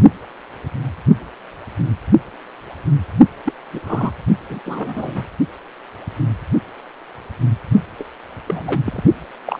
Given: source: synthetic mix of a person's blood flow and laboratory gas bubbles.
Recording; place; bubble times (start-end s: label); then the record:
Doppler ultrasound of blood flow; precordium
3.46-3.52 s: bubbles
3.73-3.81 s: bubbles
3.83-4.12 s: bubbles
4.49-4.59 s: bubbles
4.66-5.28 s: bubbles
7.99-8.04 s: bubbles
8.48-8.82 s: bubbles
8.86-9.03 s: bubbles
9.46-9.60 s: bubbles
From the record:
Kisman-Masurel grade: 222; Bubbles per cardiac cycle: several, 3 to 8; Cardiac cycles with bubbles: 10 to 50%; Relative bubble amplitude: moderate (0.250 to 0.450); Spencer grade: 2 (many but less than half of the cardiac periods contain bubble signals, singularly or in groups); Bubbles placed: only in the low amplitude regions of the cardiac cycle